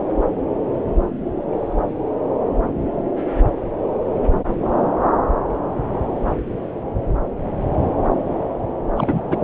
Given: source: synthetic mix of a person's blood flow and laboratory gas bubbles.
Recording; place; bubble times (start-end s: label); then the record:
Doppler ultrasound of blood flow; subclavian vein
8.95-9.21 s: bubbles
9.29-9.37 s: bubbles
From the record:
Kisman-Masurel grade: 213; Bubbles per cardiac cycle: several, 3 to 8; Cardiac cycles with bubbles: 1 to 10%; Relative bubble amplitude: loud (0.450 to 0.775); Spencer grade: 1 (occasional bubble signal discernible with the cardiac motion signal, with majority of cardiac periods free of bubbles); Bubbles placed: anywhere in the cardiac cycle